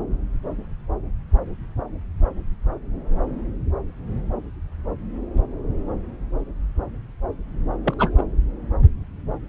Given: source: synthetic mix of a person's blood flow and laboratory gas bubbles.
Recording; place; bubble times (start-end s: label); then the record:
Doppler ultrasound of blood flow; subclavian vein
7.83-7.94 s: bubbles
7.98-8.10 s: bubbles
8.17-8.22 s: bubbles
From the record:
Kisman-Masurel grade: 212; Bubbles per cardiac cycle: several, 3 to 8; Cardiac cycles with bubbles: 1 to 10%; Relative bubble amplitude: moderate (0.250 to 0.450); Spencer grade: 1 (occasional bubble signal discernible with the cardiac motion signal, with majority of cardiac periods free of bubbles); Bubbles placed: anywhere in the cardiac cycle